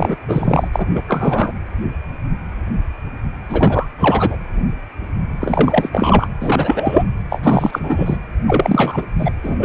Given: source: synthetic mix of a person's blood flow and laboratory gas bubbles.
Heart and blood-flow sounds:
Doppler ultrasound of blood flow; precordium
0.00-0.15 s: bubbles
0.28-0.68 s: bubbles
0.72-0.86 s: bubbles
0.95-1.03 s: bubbles
1.08-1.52 s: bubbles
3.49-3.88 s: bubbles
3.97-4.38 s: bubbles
5.41-6.29 s: bubbles
6.41-7.04 s: bubbles
7.29-8.18 s: bubbles
8.47-9.06 s: bubbles
9.18-9.31 s: bubbles
9.44-9.56 s: bubbles
9.60-9.65 s: bubbles
From the record:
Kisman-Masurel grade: 333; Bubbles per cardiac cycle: rolling drumbeat, 9 or more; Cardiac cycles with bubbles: 50 to 99%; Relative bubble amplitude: loud (0.450 to 0.775); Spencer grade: 3 (all of the cardiac periods contain showers or single bubble signals, but not dominating or overriding the cardiac motion signals); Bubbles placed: anywhere in the cardiac cycle

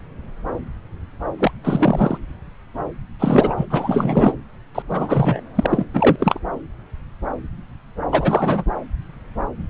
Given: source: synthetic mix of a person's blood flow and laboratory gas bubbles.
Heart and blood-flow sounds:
Doppler ultrasound of blood flow; subclavian vein
1.39-1.51 s: bubbles
1.64-2.18 s: bubbles
3.19-3.67 s: bubbles
3.70-4.33 s: bubbles
4.75-4.83 s: bubbles
4.89-5.41 s: bubbles
5.55-5.67 s: bubbles
5.69-5.85 s: bubbles
5.94-6.16 s: bubbles
6.19-6.40 s: bubbles
8.11-8.64 s: bubbles
From the record:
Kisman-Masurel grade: 333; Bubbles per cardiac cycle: rolling drumbeat, 9 or more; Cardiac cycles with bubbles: 50 to 99%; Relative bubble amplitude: loud (0.450 to 0.775); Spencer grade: 3 (all of the cardiac periods contain showers or single bubble signals, but not dominating or overriding the cardiac motion signals); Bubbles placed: anywhere in the cardiac cycle

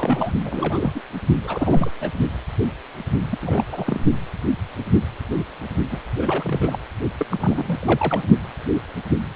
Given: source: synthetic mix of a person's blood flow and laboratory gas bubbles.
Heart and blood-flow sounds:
Doppler ultrasound of blood flow; precordium
0.00-0.32 s: bubbles
0.45-1.01 s: bubbles
1.44-1.90 s: bubbles
2.00-2.09 s: bubbles
3.30-3.38 s: bubbles
3.41-4.00 s: bubbles
5.91-6.02 s: bubbles
6.17-6.78 s: bubbles
7.19-7.25 s: bubbles
7.31-8.24 s: bubbles
From the record:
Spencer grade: 3 (all of the cardiac periods contain showers or single bubble signals, but not dominating or overriding the cardiac motion signals); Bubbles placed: only in the low amplitude regions of the cardiac cycle

